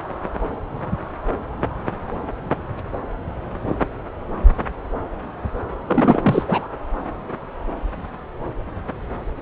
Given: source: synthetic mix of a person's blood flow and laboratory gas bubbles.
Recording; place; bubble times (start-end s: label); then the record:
Doppler ultrasound of blood flow; subclavian vein
5.87-6.42 s: bubbles
6.48-6.67 s: bubbles
From the record:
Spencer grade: 1 (occasional bubble signal discernible with the cardiac motion signal, with majority of cardiac periods free of bubbles); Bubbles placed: anywhere in the cardiac cycle